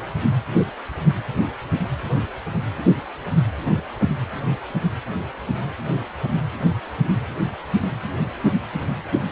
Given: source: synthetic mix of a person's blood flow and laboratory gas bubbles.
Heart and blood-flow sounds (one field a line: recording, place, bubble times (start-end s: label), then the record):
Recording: Doppler ultrasound of blood flow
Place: precordium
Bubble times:
no bubbles
From the record:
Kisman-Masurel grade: 000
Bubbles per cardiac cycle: 0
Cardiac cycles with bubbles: 0%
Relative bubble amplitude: no bubbles discernible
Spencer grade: 0 (complete lack of bubble signals)